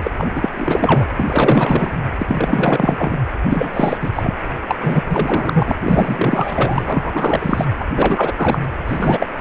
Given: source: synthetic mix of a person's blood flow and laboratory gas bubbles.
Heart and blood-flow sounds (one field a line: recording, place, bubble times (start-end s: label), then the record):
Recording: Doppler ultrasound of blood flow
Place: precordium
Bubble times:
0.03-0.11 s: bubbles
0.18-0.49 s: bubbles
0.54-1.07 s: bubbles
1.17-1.97 s: bubbles
2.19-3.17 s: bubbles
3.43-3.97 s: bubbles
4.00-4.10 s: bubbles
4.15-4.34 s: bubbles
4.67-4.76 s: bubbles
4.81-5.02 s: bubbles
5.09-5.75 s: bubbles
5.84-7.65 s: bubbles
7.79-7.85 s: bubbles
7.95-8.34 s: bubbles
8.36-8.60 s: bubbles
8.87-9.27 s: bubbles
9.37-9.41 s: bubbles
From the record:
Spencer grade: 4 (maximum detectable bubble signal sounding continuously throughout systole and diastole of every cardiac period, and overriding the amplitude of the normal cardiac signals)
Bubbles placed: anywhere in the cardiac cycle